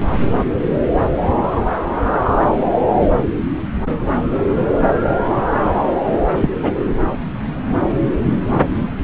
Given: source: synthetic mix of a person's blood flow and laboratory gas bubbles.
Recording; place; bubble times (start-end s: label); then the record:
Doppler ultrasound of blood flow; subclavian vein
6.40-6.49 s: bubbles
6.62-6.72 s: bubbles
From the record:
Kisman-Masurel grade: 113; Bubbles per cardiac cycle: 1 to 2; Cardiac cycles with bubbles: 1 to 10%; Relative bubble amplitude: loud (0.450 to 0.775); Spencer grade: 1 (occasional bubble signal discernible with the cardiac motion signal, with majority of cardiac periods free of bubbles); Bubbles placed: anywhere in the cardiac cycle